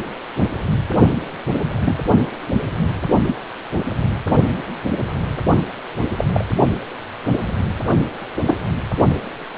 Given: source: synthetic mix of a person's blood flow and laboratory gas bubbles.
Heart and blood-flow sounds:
Doppler ultrasound of blood flow; precordium
1.85-1.96 s: bubbles
3.26-3.37 s: bubbles
6.18-6.25 s: bubbles
6.33-6.47 s: bubbles
8.46-8.56 s: bubbles
From the record:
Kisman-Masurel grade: 122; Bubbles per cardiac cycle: 1 to 2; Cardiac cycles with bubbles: 10 to 50%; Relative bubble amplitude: moderate (0.250 to 0.450); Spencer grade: 2 (many but less than half of the cardiac periods contain bubble signals, singularly or in groups); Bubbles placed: only in the low amplitude regions of the cardiac cycle

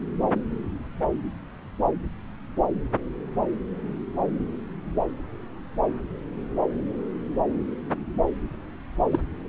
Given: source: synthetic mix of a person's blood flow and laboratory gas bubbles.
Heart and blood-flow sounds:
Doppler ultrasound of blood flow; subclavian vein
9.12-9.19 s: bubbles
From the record:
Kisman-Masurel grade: 111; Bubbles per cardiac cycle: 1 to 2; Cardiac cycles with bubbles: 1 to 10%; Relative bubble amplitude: barely perceptible (0.100 to 0.250); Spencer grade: 1 (occasional bubble signal discernible with the cardiac motion signal, with majority of cardiac periods free of bubbles); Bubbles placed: anywhere in the cardiac cycle

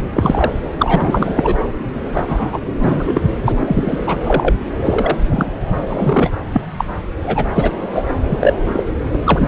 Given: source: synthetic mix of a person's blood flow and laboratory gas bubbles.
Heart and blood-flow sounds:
Doppler ultrasound of blood flow; subclavian vein
0.14-0.53 s: bubbles
0.75-1.55 s: bubbles
2.14-2.24 s: bubbles
2.28-3.22 s: bubbles
3.45-4.17 s: bubbles
4.23-4.54 s: bubbles
4.84-5.17 s: bubbles
5.29-5.52 s: bubbles
5.89-6.31 s: bubbles
6.53-6.61 s: bubbles
6.77-6.84 s: bubbles
7.24-7.48 s: bubbles
7.55-7.71 s: bubbles
7.93-8.03 s: bubbles
8.29-8.54 s: bubbles
8.67-8.84 s: bubbles
9.12-9.18 s: bubbles
9.25-9.48 s: bubbles
From the record:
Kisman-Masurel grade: 233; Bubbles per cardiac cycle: several, 3 to 8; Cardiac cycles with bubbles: 50 to 99%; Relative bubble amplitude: loud (0.450 to 0.775); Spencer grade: 3 (all of the cardiac periods contain showers or single bubble signals, but not dominating or overriding the cardiac motion signals); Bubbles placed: anywhere in the cardiac cycle

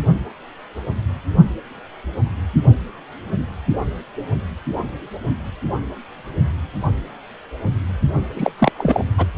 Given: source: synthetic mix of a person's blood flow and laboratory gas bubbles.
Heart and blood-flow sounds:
Doppler ultrasound of blood flow; precordium
8.36-8.52 s: bubbles
8.58-8.71 s: bubbles
8.78-9.04 s: bubbles
9.17-9.26 s: bubbles
From the record:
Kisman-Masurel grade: 213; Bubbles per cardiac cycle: several, 3 to 8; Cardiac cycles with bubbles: 1 to 10%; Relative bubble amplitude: loud (0.450 to 0.775); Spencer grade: 1 (occasional bubble signal discernible with the cardiac motion signal, with majority of cardiac periods free of bubbles); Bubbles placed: only in the low amplitude regions of the cardiac cycle

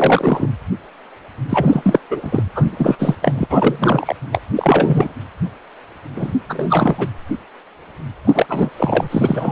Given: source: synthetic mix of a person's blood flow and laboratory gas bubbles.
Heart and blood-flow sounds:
Doppler ultrasound of blood flow; precordium
0.00-0.47 s: bubbles
1.49-2.00 s: bubbles
2.10-2.43 s: bubbles
2.54-3.16 s: bubbles
3.21-3.46 s: bubbles
3.50-4.15 s: bubbles
4.32-4.40 s: bubbles
4.53-5.13 s: bubbles
6.15-6.33 s: bubbles
6.48-7.07 s: bubbles
8.24-8.46 s: bubbles
8.49-8.70 s: bubbles
8.77-9.08 s: bubbles
9.11-9.52 s: bubbles
From the record:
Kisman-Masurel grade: 333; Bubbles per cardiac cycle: rolling drumbeat, 9 or more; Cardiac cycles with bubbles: 50 to 99%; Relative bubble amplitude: loud (0.450 to 0.775); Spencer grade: 3 (all of the cardiac periods contain showers or single bubble signals, but not dominating or overriding the cardiac motion signals); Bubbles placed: anywhere in the cardiac cycle

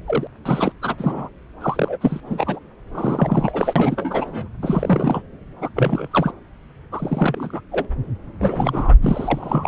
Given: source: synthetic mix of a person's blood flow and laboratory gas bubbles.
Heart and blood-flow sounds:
Doppler ultrasound of blood flow; subclavian vein
0.06-0.28 s: bubbles
0.45-0.72 s: bubbles
0.82-0.95 s: bubbles
0.98-1.29 s: bubbles
1.60-1.98 s: bubbles
2.00-2.21 s: bubbles
2.25-2.60 s: bubbles
2.91-4.48 s: bubbles
4.62-5.22 s: bubbles
5.61-5.68 s: bubbles
5.76-6.08 s: bubbles
6.11-6.31 s: bubbles
6.92-7.60 s: bubbles
7.71-7.86 s: bubbles
8.41-8.93 s: bubbles
9.01-9.67 s: bubbles
From the record:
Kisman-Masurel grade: 332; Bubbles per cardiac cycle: rolling drumbeat, 9 or more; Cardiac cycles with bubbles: 50 to 99%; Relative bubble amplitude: moderate (0.250 to 0.450); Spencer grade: 3 (all of the cardiac periods contain showers or single bubble signals, but not dominating or overriding the cardiac motion signals); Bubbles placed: anywhere in the cardiac cycle

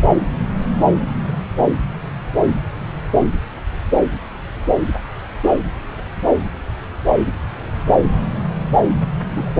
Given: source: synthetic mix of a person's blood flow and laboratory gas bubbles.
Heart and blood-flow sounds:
Doppler ultrasound of blood flow; subclavian vein
9.33-9.51 s: bubbles
From the record:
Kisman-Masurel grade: 111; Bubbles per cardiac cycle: 1 to 2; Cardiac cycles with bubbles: 1 to 10%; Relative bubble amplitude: barely perceptible (0.100 to 0.250); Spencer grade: 1 (occasional bubble signal discernible with the cardiac motion signal, with majority of cardiac periods free of bubbles); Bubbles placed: anywhere in the cardiac cycle

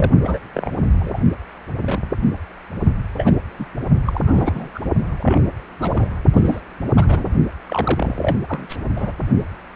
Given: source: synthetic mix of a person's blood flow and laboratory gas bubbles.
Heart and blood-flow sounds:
Doppler ultrasound of blood flow; precordium
0.00-0.12 s: bubbles
0.24-0.39 s: bubbles
0.54-0.70 s: bubbles
0.99-1.21 s: bubbles
1.85-2.20 s: bubbles
3.18-3.41 s: bubbles
3.58-3.66 s: bubbles
4.05-4.21 s: bubbles
4.26-4.80 s: bubbles
5.09-5.41 s: bubbles
5.79-6.16 s: bubbles
6.33-6.60 s: bubbles
6.96-7.30 s: bubbles
7.67-8.38 s: bubbles
8.49-8.67 s: bubbles
8.69-8.76 s: bubbles
8.96-9.12 s: bubbles
From the record:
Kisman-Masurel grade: 242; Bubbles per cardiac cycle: several, 3 to 8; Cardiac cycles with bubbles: 100%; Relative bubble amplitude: moderate (0.250 to 0.450); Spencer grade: 3 (all of the cardiac periods contain showers or single bubble signals, but not dominating or overriding the cardiac motion signals); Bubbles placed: only in the low amplitude regions of the cardiac cycle

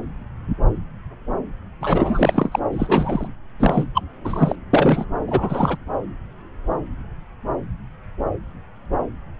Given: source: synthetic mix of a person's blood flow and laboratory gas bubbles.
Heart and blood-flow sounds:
Doppler ultrasound of blood flow; subclavian vein
1.80-2.59 s: bubbles
2.73-3.27 s: bubbles
3.59-3.86 s: bubbles
3.94-4.03 s: bubbles
4.25-4.55 s: bubbles
4.73-5.05 s: bubbles
5.28-5.78 s: bubbles
From the record:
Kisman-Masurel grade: 333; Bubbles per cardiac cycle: rolling drumbeat, 9 or more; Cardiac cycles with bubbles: 50 to 99%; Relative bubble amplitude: loud (0.450 to 0.775); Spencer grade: 3 (all of the cardiac periods contain showers or single bubble signals, but not dominating or overriding the cardiac motion signals); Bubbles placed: anywhere in the cardiac cycle

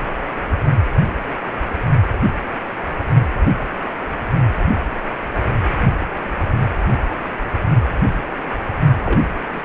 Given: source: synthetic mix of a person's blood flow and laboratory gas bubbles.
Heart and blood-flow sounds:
Doppler ultrasound of blood flow; precordium
9.04-9.20 s: bubbles
9.52-9.60 s: bubbles
From the record:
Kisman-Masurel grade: 122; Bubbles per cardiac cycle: 1 to 2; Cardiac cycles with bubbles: 10 to 50%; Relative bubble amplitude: moderate (0.250 to 0.450); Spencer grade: 2 (many but less than half of the cardiac periods contain bubble signals, singularly or in groups); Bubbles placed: only in the low amplitude regions of the cardiac cycle

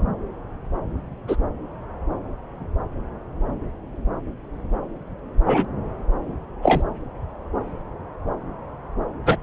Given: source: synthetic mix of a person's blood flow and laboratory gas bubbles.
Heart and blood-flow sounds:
Doppler ultrasound of blood flow; subclavian vein
1.27-1.36 s: bubbles
5.45-5.65 s: bubbles
6.62-6.83 s: bubbles
9.25-9.37 s: bubbles
From the record:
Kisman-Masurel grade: 123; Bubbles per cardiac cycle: 1 to 2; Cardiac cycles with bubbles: 10 to 50%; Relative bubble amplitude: loud (0.450 to 0.775); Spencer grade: 2 (many but less than half of the cardiac periods contain bubble signals, singularly or in groups); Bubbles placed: anywhere in the cardiac cycle

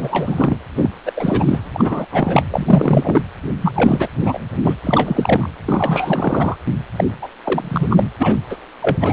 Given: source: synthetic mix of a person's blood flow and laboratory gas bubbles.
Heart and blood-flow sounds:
Doppler ultrasound of blood flow; precordium
0.00-0.55 s: bubbles
0.75-0.90 s: bubbles
1.06-1.12 s: bubbles
1.16-1.70 s: bubbles
1.73-2.05 s: bubbles
2.12-2.42 s: bubbles
2.50-3.22 s: bubbles
3.61-3.73 s: bubbles
3.75-4.08 s: bubbles
4.25-4.39 s: bubbles
4.65-4.74 s: bubbles
4.83-5.50 s: bubbles
5.66-6.56 s: bubbles
6.96-7.04 s: bubbles
7.22-7.28 s: bubbles
7.44-7.88 s: bubbles
7.90-8.04 s: bubbles
8.19-8.36 s: bubbles
8.49-8.58 s: bubbles
8.82-8.97 s: bubbles
9.00-9.13 s: bubbles
From the record:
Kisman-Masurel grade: 333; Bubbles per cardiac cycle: rolling drumbeat, 9 or more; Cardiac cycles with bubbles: 50 to 99%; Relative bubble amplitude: loud (0.450 to 0.775); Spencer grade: 3 (all of the cardiac periods contain showers or single bubble signals, but not dominating or overriding the cardiac motion signals); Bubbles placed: anywhere in the cardiac cycle

